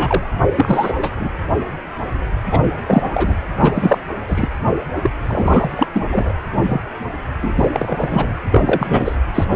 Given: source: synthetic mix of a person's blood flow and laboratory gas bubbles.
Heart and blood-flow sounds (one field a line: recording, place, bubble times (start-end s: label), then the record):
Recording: Doppler ultrasound of blood flow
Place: precordium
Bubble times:
0.00-0.31 s: bubbles
0.55-0.94 s: bubbles
0.97-1.09 s: bubbles
1.19-1.30 s: bubbles
2.51-2.70 s: bubbles
2.86-3.37 s: bubbles
3.58-3.98 s: bubbles
4.28-4.48 s: bubbles
5.03-5.11 s: bubbles
5.28-5.88 s: bubbles
5.93-6.08 s: bubbles
6.11-6.34 s: bubbles
6.52-6.58 s: bubbles
6.67-6.81 s: bubbles
7.42-7.69 s: bubbles
7.72-8.33 s: bubbles
8.51-9.16 s: bubbles
9.34-9.45 s: bubbles
9.50-9.56 s: bubbles
From the record:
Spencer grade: 3 (all of the cardiac periods contain showers or single bubble signals, but not dominating or overriding the cardiac motion signals)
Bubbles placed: anywhere in the cardiac cycle